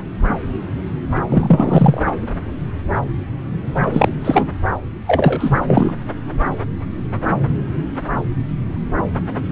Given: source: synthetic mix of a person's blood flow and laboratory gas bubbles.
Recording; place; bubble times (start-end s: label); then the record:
Doppler ultrasound of blood flow; subclavian vein
1.27-2.02 s: bubbles
3.85-4.09 s: bubbles
4.25-4.48 s: bubbles
5.07-5.59 s: bubbles
5.67-5.94 s: bubbles
From the record:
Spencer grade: 2 (many but less than half of the cardiac periods contain bubble signals, singularly or in groups); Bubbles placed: anywhere in the cardiac cycle